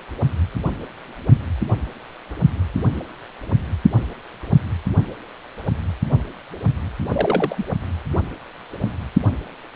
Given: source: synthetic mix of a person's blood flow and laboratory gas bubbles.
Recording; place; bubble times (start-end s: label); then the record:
Doppler ultrasound of blood flow; precordium
7.08-7.64 s: bubbles
From the record:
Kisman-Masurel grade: 212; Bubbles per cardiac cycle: several, 3 to 8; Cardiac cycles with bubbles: 1 to 10%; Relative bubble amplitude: moderate (0.250 to 0.450); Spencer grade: 1 (occasional bubble signal discernible with the cardiac motion signal, with majority of cardiac periods free of bubbles); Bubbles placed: anywhere in the cardiac cycle